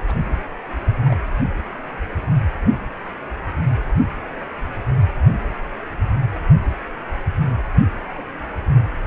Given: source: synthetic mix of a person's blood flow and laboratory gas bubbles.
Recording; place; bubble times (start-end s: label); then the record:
Doppler ultrasound of blood flow; precordium
0.08-0.14 s: bubbles
1.06-1.16 s: bubbles
8.14-8.22 s: bubbles
From the record:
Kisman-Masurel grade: 121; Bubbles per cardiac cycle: 1 to 2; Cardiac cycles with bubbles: 10 to 50%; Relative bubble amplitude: barely perceptible (0.100 to 0.250); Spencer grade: 2 (many but less than half of the cardiac periods contain bubble signals, singularly or in groups); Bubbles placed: anywhere in the cardiac cycle